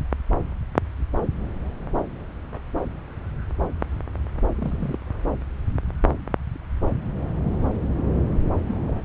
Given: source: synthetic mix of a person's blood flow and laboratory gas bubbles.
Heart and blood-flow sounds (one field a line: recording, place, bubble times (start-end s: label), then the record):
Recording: Doppler ultrasound of blood flow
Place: subclavian vein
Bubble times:
4.54-4.97 s: bubbles
8.67-8.80 s: bubbles
8.86-9.03 s: bubbles
From the record:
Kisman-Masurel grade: 221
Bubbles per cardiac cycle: several, 3 to 8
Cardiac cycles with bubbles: 10 to 50%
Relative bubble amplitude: barely perceptible (0.100 to 0.250)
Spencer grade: 2 (many but less than half of the cardiac periods contain bubble signals, singularly or in groups)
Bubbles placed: anywhere in the cardiac cycle